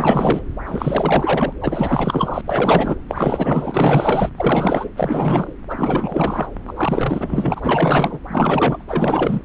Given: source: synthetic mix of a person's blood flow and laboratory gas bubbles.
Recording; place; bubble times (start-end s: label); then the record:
Doppler ultrasound of blood flow; subclavian vein
0.00-0.42 s: bubbles
0.65-1.52 s: bubbles
1.60-2.41 s: bubbles
2.46-2.98 s: bubbles
3.08-4.30 s: bubbles
4.36-4.90 s: bubbles
4.96-5.53 s: bubbles
5.69-6.48 s: bubbles
6.67-8.19 s: bubbles
8.28-8.84 s: bubbles
8.88-9.41 s: bubbles
From the record:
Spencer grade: 4 (maximum detectable bubble signal sounding continuously throughout systole and diastole of every cardiac period, and overriding the amplitude of the normal cardiac signals); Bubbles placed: anywhere in the cardiac cycle